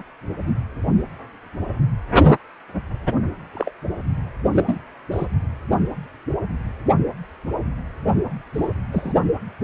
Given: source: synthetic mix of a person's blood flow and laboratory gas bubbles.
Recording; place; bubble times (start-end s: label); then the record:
Doppler ultrasound of blood flow; precordium
0.00-0.02 s: bubbles
3.55-3.71 s: bubbles
4.53-4.78 s: bubbles
5.11-5.26 s: bubbles
8.54-8.70 s: bubbles
8.92-9.13 s: bubbles
From the record:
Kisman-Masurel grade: 122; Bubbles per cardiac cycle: 1 to 2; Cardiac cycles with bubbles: 10 to 50%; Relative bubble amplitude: moderate (0.250 to 0.450); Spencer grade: 2 (many but less than half of the cardiac periods contain bubble signals, singularly or in groups); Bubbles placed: only in the low amplitude regions of the cardiac cycle